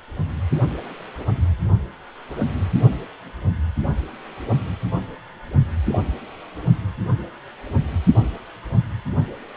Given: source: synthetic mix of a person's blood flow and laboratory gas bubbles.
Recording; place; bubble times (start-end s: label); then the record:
Doppler ultrasound of blood flow; precordium
5.88-5.99 s: bubbles
From the record:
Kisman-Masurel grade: 122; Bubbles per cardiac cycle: 1 to 2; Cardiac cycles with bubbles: 10 to 50%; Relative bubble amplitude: moderate (0.250 to 0.450); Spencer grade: 2 (many but less than half of the cardiac periods contain bubble signals, singularly or in groups); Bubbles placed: only in the low amplitude regions of the cardiac cycle